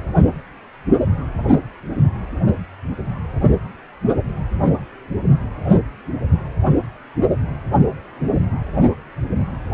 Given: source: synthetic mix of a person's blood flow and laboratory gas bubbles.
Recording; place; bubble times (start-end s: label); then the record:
Doppler ultrasound of blood flow; precordium
1.45-1.58 s: bubbles
From the record:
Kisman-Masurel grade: 112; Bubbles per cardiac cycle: 1 to 2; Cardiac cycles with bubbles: 1 to 10%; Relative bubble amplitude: moderate (0.250 to 0.450); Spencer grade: 1 (occasional bubble signal discernible with the cardiac motion signal, with majority of cardiac periods free of bubbles); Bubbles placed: only in the low amplitude regions of the cardiac cycle